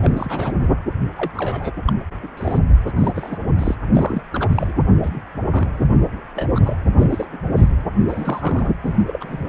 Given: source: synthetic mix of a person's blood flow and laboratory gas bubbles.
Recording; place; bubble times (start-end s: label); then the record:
Doppler ultrasound of blood flow; precordium
0.00-0.52 s: bubbles
0.60-0.68 s: bubbles
1.16-1.31 s: bubbles
1.34-1.72 s: bubbles
1.87-1.93 s: bubbles
2.23-2.28 s: bubbles
2.37-2.59 s: bubbles
2.86-2.92 s: bubbles
2.96-3.38 s: bubbles
3.58-3.75 s: bubbles
3.94-4.22 s: bubbles
4.32-4.75 s: bubbles
5.03-5.21 s: bubbles
5.50-5.67 s: bubbles
6.35-6.47 s: bubbles
6.54-6.76 s: bubbles
6.96-7.26 s: bubbles
7.32-7.38 s: bubbles
7.57-7.69 s: bubbles
8.00-8.71 s: bubbles
8.82-9.04 s: bubbles
9.07-9.48 s: bubbles
From the record:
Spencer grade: 3 (all of the cardiac periods contain showers or single bubble signals, but not dominating or overriding the cardiac motion signals); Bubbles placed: anywhere in the cardiac cycle